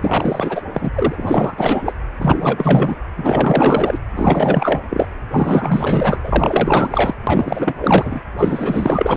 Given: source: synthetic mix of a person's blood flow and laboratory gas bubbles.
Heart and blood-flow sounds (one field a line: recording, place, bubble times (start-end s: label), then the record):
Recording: Doppler ultrasound of blood flow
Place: precordium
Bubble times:
0.01-0.62 s: bubbles
0.73-0.91 s: bubbles
0.94-1.93 s: bubbles
2.20-2.96 s: bubbles
3.16-3.99 s: bubbles
4.16-4.79 s: bubbles
4.90-5.06 s: bubbles
5.33-6.21 s: bubbles
6.24-7.14 s: bubbles
7.27-7.75 s: bubbles
7.81-8.20 s: bubbles
8.38-9.17 s: bubbles
From the record:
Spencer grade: 4 (maximum detectable bubble signal sounding continuously throughout systole and diastole of every cardiac period, and overriding the amplitude of the normal cardiac signals)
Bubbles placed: anywhere in the cardiac cycle